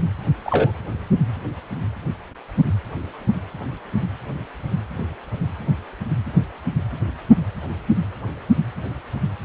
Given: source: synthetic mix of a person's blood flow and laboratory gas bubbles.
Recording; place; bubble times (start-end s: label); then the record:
Doppler ultrasound of blood flow; precordium
0.45-0.71 s: bubbles
From the record:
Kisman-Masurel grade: 113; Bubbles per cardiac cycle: 1 to 2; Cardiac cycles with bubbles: 1 to 10%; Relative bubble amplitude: loud (0.450 to 0.775); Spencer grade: 1 (occasional bubble signal discernible with the cardiac motion signal, with majority of cardiac periods free of bubbles); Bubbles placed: anywhere in the cardiac cycle